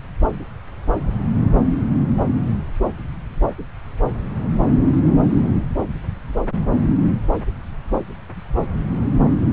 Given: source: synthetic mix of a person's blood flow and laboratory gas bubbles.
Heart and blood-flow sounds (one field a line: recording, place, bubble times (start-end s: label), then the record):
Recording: Doppler ultrasound of blood flow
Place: subclavian vein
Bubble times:
no bubbles
From the record:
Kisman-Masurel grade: 000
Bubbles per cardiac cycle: 0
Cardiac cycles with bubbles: 0%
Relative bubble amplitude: no bubbles discernible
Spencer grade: 0 (complete lack of bubble signals)